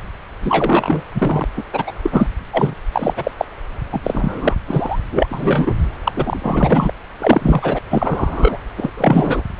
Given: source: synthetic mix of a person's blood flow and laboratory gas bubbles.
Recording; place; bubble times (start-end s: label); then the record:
Doppler ultrasound of blood flow; subclavian vein
0.42-1.02 s: bubbles
1.14-1.45 s: bubbles
1.56-1.63 s: bubbles
1.73-1.92 s: bubbles
2.02-2.27 s: bubbles
2.52-2.75 s: bubbles
2.92-3.13 s: bubbles
3.16-3.31 s: bubbles
3.37-3.45 s: bubbles
3.92-4.00 s: bubbles
4.03-4.55 s: bubbles
4.67-4.99 s: bubbles
5.11-5.74 s: bubbles
6.04-6.12 s: bubbles
6.16-6.91 s: bubbles
7.18-7.79 s: bubbles
7.89-8.57 s: bubbles
8.76-8.90 s: bubbles
8.97-9.43 s: bubbles
9.58-9.60 s: bubbles
From the record:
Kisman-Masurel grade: 343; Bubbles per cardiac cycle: rolling drumbeat, 9 or more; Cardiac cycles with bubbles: 100%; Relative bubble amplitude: loud (0.450 to 0.775); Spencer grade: 3 (all of the cardiac periods contain showers or single bubble signals, but not dominating or overriding the cardiac motion signals); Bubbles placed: anywhere in the cardiac cycle